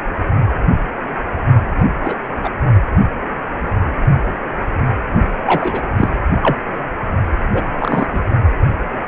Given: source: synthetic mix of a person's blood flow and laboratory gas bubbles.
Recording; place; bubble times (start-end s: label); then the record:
Doppler ultrasound of blood flow; precordium
1.79-1.85 s: bubbles
2.04-2.14 s: bubbles
2.43-2.50 s: bubbles
5.46-5.81 s: bubbles
5.96-6.09 s: bubbles
6.42-6.57 s: bubbles
7.53-7.62 s: bubbles
7.79-8.06 s: bubbles
8.13-8.20 s: bubbles
From the record:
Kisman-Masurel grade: 223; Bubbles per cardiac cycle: several, 3 to 8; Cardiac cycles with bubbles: 10 to 50%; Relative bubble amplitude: loud (0.450 to 0.775); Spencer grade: 2 (many but less than half of the cardiac periods contain bubble signals, singularly or in groups); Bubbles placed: only in the low amplitude regions of the cardiac cycle